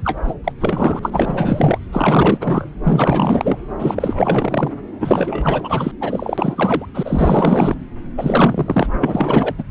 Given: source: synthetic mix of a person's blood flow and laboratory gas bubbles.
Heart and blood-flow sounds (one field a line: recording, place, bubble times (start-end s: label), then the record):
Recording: Doppler ultrasound of blood flow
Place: subclavian vein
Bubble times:
0.04-0.18 s: bubbles
0.23-0.34 s: bubbles
0.44-0.52 s: bubbles
0.60-0.99 s: bubbles
1.02-1.79 s: bubbles
1.92-2.70 s: bubbles
2.85-3.58 s: bubbles
3.79-4.71 s: bubbles
5.00-5.92 s: bubbles
6.00-6.86 s: bubbles
6.94-7.75 s: bubbles
8.17-8.88 s: bubbles
9.00-9.55 s: bubbles
9.58-9.63 s: bubbles
From the record:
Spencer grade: 4 (maximum detectable bubble signal sounding continuously throughout systole and diastole of every cardiac period, and overriding the amplitude of the normal cardiac signals)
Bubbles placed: anywhere in the cardiac cycle